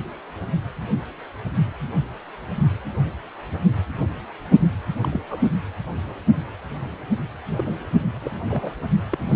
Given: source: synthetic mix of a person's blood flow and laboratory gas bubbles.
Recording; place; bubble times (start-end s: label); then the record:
Doppler ultrasound of blood flow; precordium
5.01-5.21 s: bubbles
5.29-5.42 s: bubbles
7.49-7.63 s: bubbles
7.66-7.75 s: bubbles
8.21-8.31 s: bubbles
8.49-8.72 s: bubbles
9.12-9.36 s: bubbles
From the record:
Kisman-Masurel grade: 221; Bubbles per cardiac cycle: several, 3 to 8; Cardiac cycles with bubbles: 10 to 50%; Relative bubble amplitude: barely perceptible (0.100 to 0.250); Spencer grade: 2 (many but less than half of the cardiac periods contain bubble signals, singularly or in groups); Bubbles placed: anywhere in the cardiac cycle